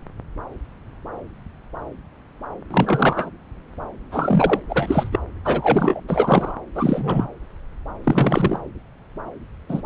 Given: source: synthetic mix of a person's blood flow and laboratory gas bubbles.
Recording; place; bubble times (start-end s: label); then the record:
Doppler ultrasound of blood flow; subclavian vein
2.71-3.30 s: bubbles
4.11-4.59 s: bubbles
4.68-5.20 s: bubbles
5.44-6.00 s: bubbles
6.07-6.53 s: bubbles
6.75-7.27 s: bubbles
8.04-8.60 s: bubbles
9.69-9.82 s: bubbles
From the record:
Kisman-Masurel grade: 233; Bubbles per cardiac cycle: several, 3 to 8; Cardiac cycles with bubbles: 50 to 99%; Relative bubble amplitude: loud (0.450 to 0.775); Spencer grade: 3 (all of the cardiac periods contain showers or single bubble signals, but not dominating or overriding the cardiac motion signals); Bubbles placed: anywhere in the cardiac cycle